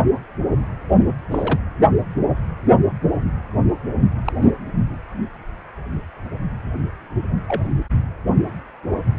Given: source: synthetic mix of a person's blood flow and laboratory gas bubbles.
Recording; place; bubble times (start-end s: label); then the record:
Doppler ultrasound of blood flow; precordium
1.31-1.58 s: bubbles
4.25-4.32 s: bubbles
4.42-4.52 s: bubbles
7.47-7.61 s: bubbles
From the record:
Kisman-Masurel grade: 122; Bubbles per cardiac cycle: 1 to 2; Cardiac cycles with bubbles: 10 to 50%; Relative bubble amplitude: moderate (0.250 to 0.450); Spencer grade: 2 (many but less than half of the cardiac periods contain bubble signals, singularly or in groups); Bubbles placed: only in the low amplitude regions of the cardiac cycle